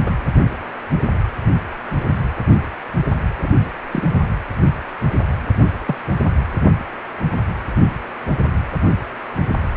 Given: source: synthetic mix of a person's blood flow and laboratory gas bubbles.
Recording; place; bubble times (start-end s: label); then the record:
Doppler ultrasound of blood flow; precordium
0.06-0.12 s: bubbles
3.42-3.48 s: bubbles
3.92-4.08 s: bubbles
5.87-5.96 s: bubbles
From the record:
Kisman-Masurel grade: 122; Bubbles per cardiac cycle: 1 to 2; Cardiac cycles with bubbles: 10 to 50%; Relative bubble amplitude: moderate (0.250 to 0.450); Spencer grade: 2 (many but less than half of the cardiac periods contain bubble signals, singularly or in groups); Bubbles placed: anywhere in the cardiac cycle